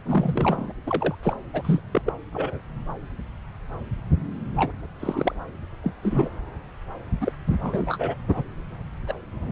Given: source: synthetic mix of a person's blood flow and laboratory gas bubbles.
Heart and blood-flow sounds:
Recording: Doppler ultrasound of blood flow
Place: subclavian vein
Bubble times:
0.06-0.72 s: bubbles
0.86-1.15 s: bubbles
1.22-1.37 s: bubbles
1.53-1.80 s: bubbles
1.92-2.02 s: bubbles
2.06-2.13 s: bubbles
2.33-2.60 s: bubbles
4.56-4.71 s: bubbles
5.00-5.34 s: bubbles
5.83-5.92 s: bubbles
6.03-6.29 s: bubbles
7.21-7.32 s: bubbles
7.49-7.57 s: bubbles
7.62-8.15 s: bubbles
8.28-8.44 s: bubbles
9.07-9.14 s: bubbles
9.32-9.51 s: bubbles
From the record:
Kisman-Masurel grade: 232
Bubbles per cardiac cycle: several, 3 to 8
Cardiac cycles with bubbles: 50 to 99%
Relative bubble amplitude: moderate (0.250 to 0.450)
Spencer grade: 3 (all of the cardiac periods contain showers or single bubble signals, but not dominating or overriding the cardiac motion signals)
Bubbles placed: anywhere in the cardiac cycle

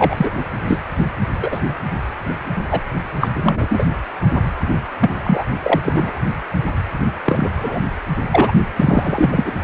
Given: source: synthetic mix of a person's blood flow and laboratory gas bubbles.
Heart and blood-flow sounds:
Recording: Doppler ultrasound of blood flow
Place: precordium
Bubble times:
0.00-0.30 s: bubbles
0.67-0.80 s: bubbles
1.41-1.61 s: bubbles
2.71-2.80 s: bubbles
3.20-3.29 s: bubbles
3.33-3.84 s: bubbles
5.00-5.11 s: bubbles
5.24-5.43 s: bubbles
5.62-5.80 s: bubbles
5.83-6.21 s: bubbles
7.25-7.49 s: bubbles
7.59-7.81 s: bubbles
8.31-8.53 s: bubbles
8.76-9.28 s: bubbles
9.32-9.54 s: bubbles
9.62-9.64 s: bubbles
From the record:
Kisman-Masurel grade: 243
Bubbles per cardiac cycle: several, 3 to 8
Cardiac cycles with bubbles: 100%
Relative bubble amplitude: loud (0.450 to 0.775)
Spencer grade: 3 (all of the cardiac periods contain showers or single bubble signals, but not dominating or overriding the cardiac motion signals)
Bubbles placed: anywhere in the cardiac cycle

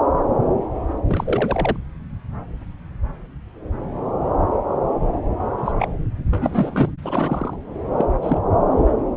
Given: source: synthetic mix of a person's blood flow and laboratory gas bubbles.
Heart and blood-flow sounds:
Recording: Doppler ultrasound of blood flow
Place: subclavian vein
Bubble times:
1.08-1.76 s: bubbles
5.57-5.72 s: bubbles
5.78-5.89 s: bubbles
6.30-6.92 s: bubbles
7.02-7.56 s: bubbles
7.98-8.06 s: bubbles
8.21-8.40 s: bubbles
From the record:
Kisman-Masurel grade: 222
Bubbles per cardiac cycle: several, 3 to 8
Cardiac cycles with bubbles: 10 to 50%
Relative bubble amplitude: moderate (0.250 to 0.450)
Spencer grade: 2 (many but less than half of the cardiac periods contain bubble signals, singularly or in groups)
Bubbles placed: anywhere in the cardiac cycle

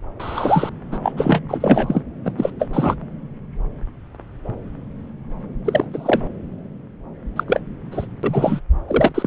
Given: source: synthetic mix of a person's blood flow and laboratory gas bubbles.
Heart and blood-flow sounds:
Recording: Doppler ultrasound of blood flow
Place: subclavian vein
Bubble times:
0.20-0.69 s: bubbles
0.91-0.99 s: bubbles
1.03-1.12 s: bubbles
1.17-1.43 s: bubbles
1.49-2.01 s: bubbles
2.25-2.32 s: bubbles
2.37-2.51 s: bubbles
2.59-2.68 s: bubbles
2.73-2.96 s: bubbles
5.65-5.85 s: bubbles
5.92-6.20 s: bubbles
7.36-7.44 s: bubbles
7.47-7.60 s: bubbles
7.91-8.06 s: bubbles
8.23-8.61 s: bubbles
8.88-9.27 s: bubbles
From the record:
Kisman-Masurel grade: 233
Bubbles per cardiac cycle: several, 3 to 8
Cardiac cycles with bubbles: 50 to 99%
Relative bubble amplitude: loud (0.450 to 0.775)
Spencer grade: 3 (all of the cardiac periods contain showers or single bubble signals, but not dominating or overriding the cardiac motion signals)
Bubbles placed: anywhere in the cardiac cycle

